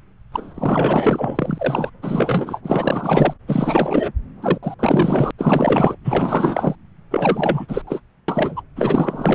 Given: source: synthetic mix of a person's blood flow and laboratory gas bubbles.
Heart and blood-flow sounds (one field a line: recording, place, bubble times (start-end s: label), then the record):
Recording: Doppler ultrasound of blood flow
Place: subclavian vein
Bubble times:
0.32-1.90 s: bubbles
2.02-2.60 s: bubbles
2.64-3.33 s: bubbles
3.47-4.12 s: bubbles
4.42-4.58 s: bubbles
4.62-4.74 s: bubbles
4.79-5.31 s: bubbles
5.38-5.96 s: bubbles
6.04-6.76 s: bubbles
7.11-7.82 s: bubbles
7.87-8.00 s: bubbles
8.28-8.62 s: bubbles
8.76-9.35 s: bubbles
From the record:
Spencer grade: 4 (maximum detectable bubble signal sounding continuously throughout systole and diastole of every cardiac period, and overriding the amplitude of the normal cardiac signals)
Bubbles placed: anywhere in the cardiac cycle